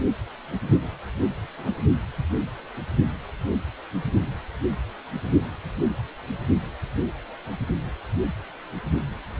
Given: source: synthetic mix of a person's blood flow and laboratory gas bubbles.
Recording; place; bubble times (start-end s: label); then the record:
Doppler ultrasound of blood flow; precordium
1.58-1.74 s: bubbles
From the record:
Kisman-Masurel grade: 121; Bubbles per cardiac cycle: 1 to 2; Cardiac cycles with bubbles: 10 to 50%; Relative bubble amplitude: barely perceptible (0.100 to 0.250); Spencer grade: 2 (many but less than half of the cardiac periods contain bubble signals, singularly or in groups); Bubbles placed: anywhere in the cardiac cycle